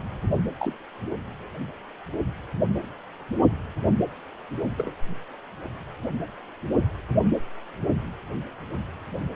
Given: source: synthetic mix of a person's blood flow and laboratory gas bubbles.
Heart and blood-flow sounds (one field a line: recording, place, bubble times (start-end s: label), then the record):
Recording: Doppler ultrasound of blood flow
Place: precordium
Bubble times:
0.59-0.76 s: bubbles
4.77-4.93 s: bubbles
From the record:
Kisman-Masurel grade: 121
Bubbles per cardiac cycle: 1 to 2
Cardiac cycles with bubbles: 10 to 50%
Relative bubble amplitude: barely perceptible (0.100 to 0.250)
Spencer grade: 2 (many but less than half of the cardiac periods contain bubble signals, singularly or in groups)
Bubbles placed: only in the low amplitude regions of the cardiac cycle